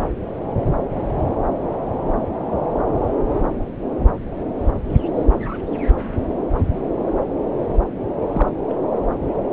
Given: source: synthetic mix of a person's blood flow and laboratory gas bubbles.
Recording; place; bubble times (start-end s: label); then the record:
Doppler ultrasound of blood flow; subclavian vein
8.31-8.49 s: bubbles
8.68-8.75 s: bubbles
From the record:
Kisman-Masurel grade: 112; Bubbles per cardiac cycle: 1 to 2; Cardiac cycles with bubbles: 1 to 10%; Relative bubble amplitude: moderate (0.250 to 0.450); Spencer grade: 1 (occasional bubble signal discernible with the cardiac motion signal, with majority of cardiac periods free of bubbles); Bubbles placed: anywhere in the cardiac cycle